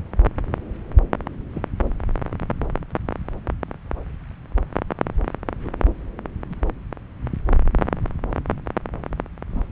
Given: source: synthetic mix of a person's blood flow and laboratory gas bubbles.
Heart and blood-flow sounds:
Doppler ultrasound of blood flow; subclavian vein
1.54-1.63 s: bubbles
5.60-5.69 s: bubbles
6.49-6.55 s: bubbles
9.50-9.63 s: bubbles
From the record:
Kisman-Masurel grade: 121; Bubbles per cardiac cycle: 1 to 2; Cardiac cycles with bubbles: 10 to 50%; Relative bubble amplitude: barely perceptible (0.100 to 0.250); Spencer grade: 2 (many but less than half of the cardiac periods contain bubble signals, singularly or in groups); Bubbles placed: anywhere in the cardiac cycle

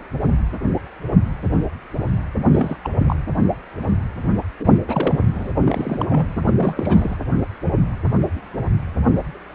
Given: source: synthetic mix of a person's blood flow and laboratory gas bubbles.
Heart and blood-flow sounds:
Doppler ultrasound of blood flow; precordium
2.52-2.77 s: bubbles
2.83-2.90 s: bubbles
2.96-3.16 s: bubbles
4.59-4.67 s: bubbles
4.88-5.15 s: bubbles
5.34-5.52 s: bubbles
5.67-6.27 s: bubbles
6.45-6.53 s: bubbles
6.57-7.17 s: bubbles
From the record:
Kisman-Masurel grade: 222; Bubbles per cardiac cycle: several, 3 to 8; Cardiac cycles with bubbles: 10 to 50%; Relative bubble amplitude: moderate (0.250 to 0.450); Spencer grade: 2 (many but less than half of the cardiac periods contain bubble signals, singularly or in groups); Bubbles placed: anywhere in the cardiac cycle

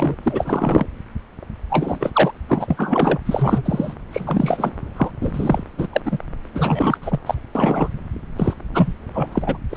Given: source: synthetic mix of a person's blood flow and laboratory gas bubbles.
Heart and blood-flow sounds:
Doppler ultrasound of blood flow; subclavian vein
0.00-0.15 s: bubbles
0.22-0.86 s: bubbles
1.70-2.31 s: bubbles
2.48-3.19 s: bubbles
3.25-3.93 s: bubbles
4.10-4.72 s: bubbles
4.96-5.11 s: bubbles
5.21-5.63 s: bubbles
5.78-5.88 s: bubbles
5.92-6.00 s: bubbles
6.05-6.18 s: bubbles
6.54-6.97 s: bubbles
7.01-7.19 s: bubbles
7.26-7.34 s: bubbles
7.55-7.88 s: bubbles
8.36-8.54 s: bubbles
8.74-8.93 s: bubbles
9.13-9.29 s: bubbles
9.32-9.58 s: bubbles
9.71-9.77 s: bubbles
From the record:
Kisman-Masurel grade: 333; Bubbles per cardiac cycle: rolling drumbeat, 9 or more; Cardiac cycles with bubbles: 50 to 99%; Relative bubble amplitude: loud (0.450 to 0.775); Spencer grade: 3 (all of the cardiac periods contain showers or single bubble signals, but not dominating or overriding the cardiac motion signals); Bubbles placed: anywhere in the cardiac cycle

